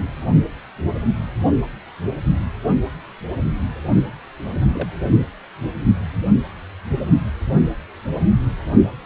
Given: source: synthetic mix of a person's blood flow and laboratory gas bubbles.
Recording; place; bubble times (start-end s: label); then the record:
Doppler ultrasound of blood flow; precordium
4.73-4.88 s: bubbles
5.03-5.13 s: bubbles
5.17-5.26 s: bubbles
From the record:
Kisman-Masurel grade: 211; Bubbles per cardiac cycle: several, 3 to 8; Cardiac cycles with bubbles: 1 to 10%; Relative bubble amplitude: barely perceptible (0.100 to 0.250); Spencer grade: 1 (occasional bubble signal discernible with the cardiac motion signal, with majority of cardiac periods free of bubbles); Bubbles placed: only in the low amplitude regions of the cardiac cycle